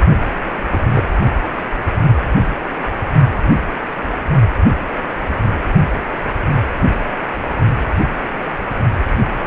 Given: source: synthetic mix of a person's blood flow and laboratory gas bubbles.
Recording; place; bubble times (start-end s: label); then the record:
Doppler ultrasound of blood flow; precordium
0.47-0.50 s: bubbles
0.73-0.79 s: bubbles
0.94-1.07 s: bubbles
From the record:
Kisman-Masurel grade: 221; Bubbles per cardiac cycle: several, 3 to 8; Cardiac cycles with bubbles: 10 to 50%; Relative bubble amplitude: barely perceptible (0.100 to 0.250); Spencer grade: 2 (many but less than half of the cardiac periods contain bubble signals, singularly or in groups); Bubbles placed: only in the low amplitude regions of the cardiac cycle